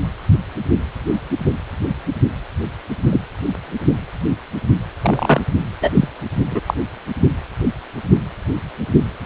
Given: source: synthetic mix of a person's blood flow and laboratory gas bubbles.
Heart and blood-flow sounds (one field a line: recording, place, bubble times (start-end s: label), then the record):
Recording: Doppler ultrasound of blood flow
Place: precordium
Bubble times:
3.12-3.21 s: bubbles
5.01-5.41 s: bubbles
5.82-5.91 s: bubbles
5.93-6.08 s: bubbles
6.51-6.62 s: bubbles
6.66-6.74 s: bubbles
From the record:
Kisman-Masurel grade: 123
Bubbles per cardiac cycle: 1 to 2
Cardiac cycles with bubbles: 10 to 50%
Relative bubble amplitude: loud (0.450 to 0.775)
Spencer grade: 2 (many but less than half of the cardiac periods contain bubble signals, singularly or in groups)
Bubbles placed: only in the low amplitude regions of the cardiac cycle